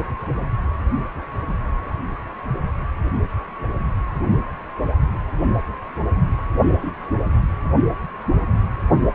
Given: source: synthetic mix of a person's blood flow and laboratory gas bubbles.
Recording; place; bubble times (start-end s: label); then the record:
Doppler ultrasound of blood flow; precordium
6.62-6.91 s: bubbles
From the record:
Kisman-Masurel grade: 122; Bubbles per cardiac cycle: 1 to 2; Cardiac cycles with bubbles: 10 to 50%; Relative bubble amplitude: moderate (0.250 to 0.450); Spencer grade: 2 (many but less than half of the cardiac periods contain bubble signals, singularly or in groups); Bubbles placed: anywhere in the cardiac cycle